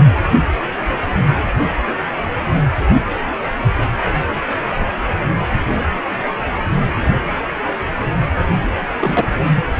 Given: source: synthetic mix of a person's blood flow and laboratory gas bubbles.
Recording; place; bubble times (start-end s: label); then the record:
Doppler ultrasound of blood flow; precordium
8.99-9.28 s: bubbles
9.56-9.63 s: bubbles
From the record:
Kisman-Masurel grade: 113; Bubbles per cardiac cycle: 1 to 2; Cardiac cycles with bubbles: 1 to 10%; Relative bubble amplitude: loud (0.450 to 0.775); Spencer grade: 1 (occasional bubble signal discernible with the cardiac motion signal, with majority of cardiac periods free of bubbles); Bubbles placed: anywhere in the cardiac cycle